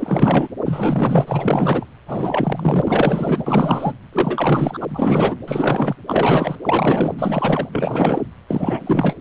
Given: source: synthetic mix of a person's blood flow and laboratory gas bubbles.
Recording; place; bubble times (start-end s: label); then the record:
Doppler ultrasound of blood flow; precordium
0.00-0.48 s: bubbles
0.65-1.86 s: bubbles
2.07-3.93 s: bubbles
4.12-4.86 s: bubbles
4.88-5.36 s: bubbles
5.47-5.96 s: bubbles
6.07-6.56 s: bubbles
6.62-7.15 s: bubbles
7.19-7.67 s: bubbles
7.72-8.22 s: bubbles
8.48-9.14 s: bubbles
From the record:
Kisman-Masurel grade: 444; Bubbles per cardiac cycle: continuous sound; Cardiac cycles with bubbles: 100%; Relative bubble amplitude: maximal (0.775 to 0.999); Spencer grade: 4 (maximum detectable bubble signal sounding continuously throughout systole and diastole of every cardiac period, and overriding the amplitude of the normal cardiac signals); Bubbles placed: anywhere in the cardiac cycle